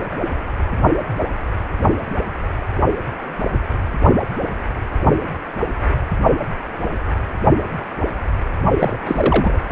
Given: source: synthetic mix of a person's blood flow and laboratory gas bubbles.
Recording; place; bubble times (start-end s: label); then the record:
Doppler ultrasound of blood flow; precordium
8.79-8.99 s: bubbles
9.06-9.59 s: bubbles
From the record:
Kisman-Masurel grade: 212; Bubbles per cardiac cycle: several, 3 to 8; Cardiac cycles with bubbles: 1 to 10%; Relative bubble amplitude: moderate (0.250 to 0.450); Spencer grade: 1 (occasional bubble signal discernible with the cardiac motion signal, with majority of cardiac periods free of bubbles); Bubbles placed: only in the low amplitude regions of the cardiac cycle